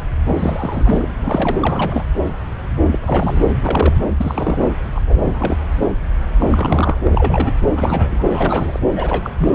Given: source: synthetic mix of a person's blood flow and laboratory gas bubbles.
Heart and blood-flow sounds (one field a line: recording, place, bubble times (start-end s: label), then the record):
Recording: Doppler ultrasound of blood flow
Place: subclavian vein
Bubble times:
0.26-1.16 s: bubbles
1.23-1.56 s: bubbles
1.61-2.03 s: bubbles
2.90-3.46 s: bubbles
3.53-3.98 s: bubbles
4.17-4.60 s: bubbles
4.95-5.00 s: bubbles
5.06-5.57 s: bubbles
5.78-5.87 s: bubbles
6.40-7.00 s: bubbles
7.04-7.60 s: bubbles
7.70-8.79 s: bubbles
8.96-9.30 s: bubbles
9.37-9.55 s: bubbles
From the record:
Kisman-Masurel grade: 332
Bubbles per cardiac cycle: rolling drumbeat, 9 or more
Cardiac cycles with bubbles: 50 to 99%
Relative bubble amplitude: moderate (0.250 to 0.450)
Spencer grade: 3 (all of the cardiac periods contain showers or single bubble signals, but not dominating or overriding the cardiac motion signals)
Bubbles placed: anywhere in the cardiac cycle